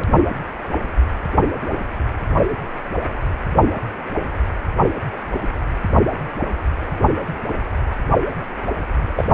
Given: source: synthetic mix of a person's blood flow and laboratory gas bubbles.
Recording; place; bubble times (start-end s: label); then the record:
Doppler ultrasound of blood flow; precordium
9.15-9.24 s: bubbles
From the record:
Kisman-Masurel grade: 212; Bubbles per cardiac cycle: several, 3 to 8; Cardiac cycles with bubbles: 1 to 10%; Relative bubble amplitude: moderate (0.250 to 0.450); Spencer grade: 1 (occasional bubble signal discernible with the cardiac motion signal, with majority of cardiac periods free of bubbles); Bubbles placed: anywhere in the cardiac cycle